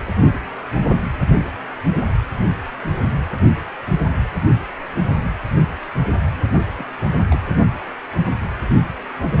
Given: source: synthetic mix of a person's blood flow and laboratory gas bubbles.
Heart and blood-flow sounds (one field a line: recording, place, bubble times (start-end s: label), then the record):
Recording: Doppler ultrasound of blood flow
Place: precordium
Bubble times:
6.77-6.86 s: bubbles
7.30-7.39 s: bubbles
From the record:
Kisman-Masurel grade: 211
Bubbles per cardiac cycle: several, 3 to 8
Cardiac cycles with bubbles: 1 to 10%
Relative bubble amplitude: barely perceptible (0.100 to 0.250)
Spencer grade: 1 (occasional bubble signal discernible with the cardiac motion signal, with majority of cardiac periods free of bubbles)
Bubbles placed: anywhere in the cardiac cycle